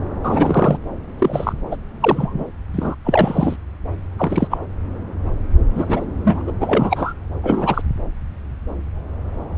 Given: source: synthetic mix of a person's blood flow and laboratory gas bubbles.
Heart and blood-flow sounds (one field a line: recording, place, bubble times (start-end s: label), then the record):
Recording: Doppler ultrasound of blood flow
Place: subclavian vein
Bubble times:
0.23-0.77 s: bubbles
1.19-1.53 s: bubbles
1.71-1.77 s: bubbles
2.00-2.46 s: bubbles
2.73-2.95 s: bubbles
3.04-3.56 s: bubbles
4.18-4.47 s: bubbles
4.50-4.58 s: bubbles
5.75-6.05 s: bubbles
6.24-6.42 s: bubbles
6.46-6.53 s: bubbles
6.61-7.13 s: bubbles
7.43-7.82 s: bubbles
From the record:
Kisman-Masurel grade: 233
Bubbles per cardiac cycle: several, 3 to 8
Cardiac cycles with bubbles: 50 to 99%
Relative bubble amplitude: loud (0.450 to 0.775)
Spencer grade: 3 (all of the cardiac periods contain showers or single bubble signals, but not dominating or overriding the cardiac motion signals)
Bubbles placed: anywhere in the cardiac cycle